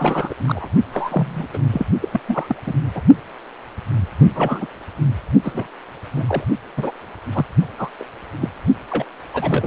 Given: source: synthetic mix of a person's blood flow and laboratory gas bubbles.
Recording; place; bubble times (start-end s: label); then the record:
Doppler ultrasound of blood flow; precordium
0.00-0.34 s: bubbles
0.46-0.69 s: bubbles
0.93-1.48 s: bubbles
1.53-1.58 s: bubbles
1.73-1.86 s: bubbles
2.01-2.08 s: bubbles
2.12-2.21 s: bubbles
2.27-2.55 s: bubbles
2.67-2.74 s: bubbles
2.95-3.01 s: bubbles
4.20-4.27 s: bubbles
4.35-4.67 s: bubbles
5.42-5.67 s: bubbles
6.15-6.44 s: bubbles
6.77-6.92 s: bubbles
7.33-7.46 s: bubbles
7.78-7.89 s: bubbles
7.99-8.04 s: bubbles
8.39-8.49 s: bubbles
8.90-9.05 s: bubbles
9.33-9.67 s: bubbles
From the record:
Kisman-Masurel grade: 232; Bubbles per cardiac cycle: several, 3 to 8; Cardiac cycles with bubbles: 50 to 99%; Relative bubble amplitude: moderate (0.250 to 0.450); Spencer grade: 3 (all of the cardiac periods contain showers or single bubble signals, but not dominating or overriding the cardiac motion signals); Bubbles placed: only in the low amplitude regions of the cardiac cycle